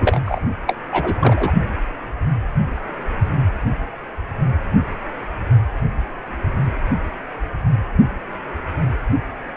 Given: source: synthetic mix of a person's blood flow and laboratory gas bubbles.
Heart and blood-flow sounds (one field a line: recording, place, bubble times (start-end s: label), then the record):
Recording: Doppler ultrasound of blood flow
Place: precordium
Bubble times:
0.01-0.21 s: bubbles
0.25-0.39 s: bubbles
0.66-0.75 s: bubbles
0.92-1.14 s: bubbles
1.21-1.52 s: bubbles
From the record:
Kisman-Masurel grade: 223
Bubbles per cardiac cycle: several, 3 to 8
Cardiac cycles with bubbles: 10 to 50%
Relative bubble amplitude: loud (0.450 to 0.775)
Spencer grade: 2 (many but less than half of the cardiac periods contain bubble signals, singularly or in groups)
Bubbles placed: only in the low amplitude regions of the cardiac cycle